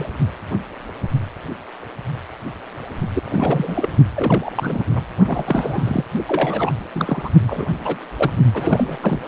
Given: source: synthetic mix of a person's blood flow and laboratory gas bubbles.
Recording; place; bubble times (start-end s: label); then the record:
Doppler ultrasound of blood flow; precordium
0.00-0.09 s: bubbles
3.15-3.23 s: bubbles
3.25-3.89 s: bubbles
4.16-4.51 s: bubbles
4.55-4.84 s: bubbles
4.95-5.02 s: bubbles
5.27-6.05 s: bubbles
6.27-6.75 s: bubbles
6.94-7.30 s: bubbles
7.46-7.66 s: bubbles
7.85-7.99 s: bubbles
8.19-8.33 s: bubbles
8.54-9.19 s: bubbles
From the record:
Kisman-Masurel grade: 332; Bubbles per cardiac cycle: rolling drumbeat, 9 or more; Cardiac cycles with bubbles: 50 to 99%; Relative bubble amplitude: moderate (0.250 to 0.450); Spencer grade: 3 (all of the cardiac periods contain showers or single bubble signals, but not dominating or overriding the cardiac motion signals); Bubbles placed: only in the low amplitude regions of the cardiac cycle